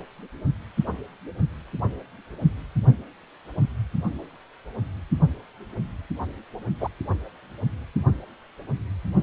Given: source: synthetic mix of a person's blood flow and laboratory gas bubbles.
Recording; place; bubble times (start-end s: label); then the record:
Doppler ultrasound of blood flow; precordium
6.80-6.88 s: bubbles
From the record:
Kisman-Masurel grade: 113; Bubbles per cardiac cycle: 1 to 2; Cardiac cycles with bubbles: 1 to 10%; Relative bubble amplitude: loud (0.450 to 0.775); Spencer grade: 1 (occasional bubble signal discernible with the cardiac motion signal, with majority of cardiac periods free of bubbles); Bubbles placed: only in the low amplitude regions of the cardiac cycle